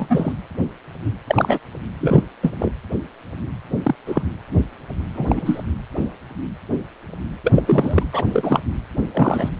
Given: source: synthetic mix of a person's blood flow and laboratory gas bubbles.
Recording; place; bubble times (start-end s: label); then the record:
Doppler ultrasound of blood flow; precordium
0.00-0.32 s: bubbles
1.26-1.59 s: bubbles
2.00-2.23 s: bubbles
2.42-2.52 s: bubbles
2.59-2.74 s: bubbles
3.83-3.95 s: bubbles
4.06-4.23 s: bubbles
5.14-5.62 s: bubbles
7.44-7.62 s: bubbles
7.66-8.04 s: bubbles
8.12-8.25 s: bubbles
8.33-8.60 s: bubbles
9.13-9.49 s: bubbles
From the record:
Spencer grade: 3 (all of the cardiac periods contain showers or single bubble signals, but not dominating or overriding the cardiac motion signals); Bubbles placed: anywhere in the cardiac cycle